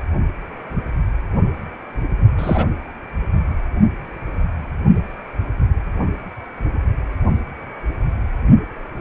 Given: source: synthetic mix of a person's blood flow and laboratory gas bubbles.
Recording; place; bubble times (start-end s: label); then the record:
Doppler ultrasound of blood flow; precordium
2.38-2.65 s: bubbles
From the record:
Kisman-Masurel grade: 213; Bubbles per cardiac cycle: several, 3 to 8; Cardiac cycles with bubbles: 1 to 10%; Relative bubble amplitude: loud (0.450 to 0.775); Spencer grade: 1 (occasional bubble signal discernible with the cardiac motion signal, with majority of cardiac periods free of bubbles); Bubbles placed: only in the low amplitude regions of the cardiac cycle